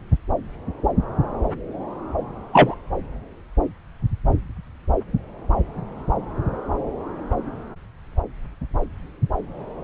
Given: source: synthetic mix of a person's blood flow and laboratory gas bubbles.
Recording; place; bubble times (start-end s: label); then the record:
Doppler ultrasound of blood flow; subclavian vein
2.52-2.75 s: bubbles
From the record:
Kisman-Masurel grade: 113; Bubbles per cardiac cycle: 1 to 2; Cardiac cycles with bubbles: 1 to 10%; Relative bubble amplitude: loud (0.450 to 0.775); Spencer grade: 1 (occasional bubble signal discernible with the cardiac motion signal, with majority of cardiac periods free of bubbles); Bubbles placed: anywhere in the cardiac cycle